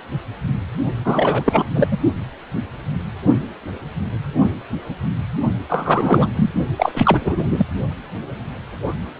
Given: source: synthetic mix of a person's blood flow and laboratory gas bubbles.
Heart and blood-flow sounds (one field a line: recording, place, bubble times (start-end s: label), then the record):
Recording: Doppler ultrasound of blood flow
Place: precordium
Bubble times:
1.04-1.65 s: bubbles
1.74-1.88 s: bubbles
1.90-1.98 s: bubbles
5.69-6.51 s: bubbles
6.76-7.46 s: bubbles
7.49-7.66 s: bubbles
From the record:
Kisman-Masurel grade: 333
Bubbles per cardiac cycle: rolling drumbeat, 9 or more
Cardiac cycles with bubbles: 50 to 99%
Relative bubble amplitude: loud (0.450 to 0.775)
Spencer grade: 3 (all of the cardiac periods contain showers or single bubble signals, but not dominating or overriding the cardiac motion signals)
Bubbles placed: only in the low amplitude regions of the cardiac cycle